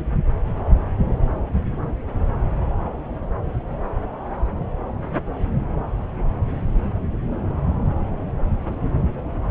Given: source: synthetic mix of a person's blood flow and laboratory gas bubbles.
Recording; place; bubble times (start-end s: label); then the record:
Doppler ultrasound of blood flow; subclavian vein
no bubbles
From the record:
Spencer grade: 0 (complete lack of bubble signals)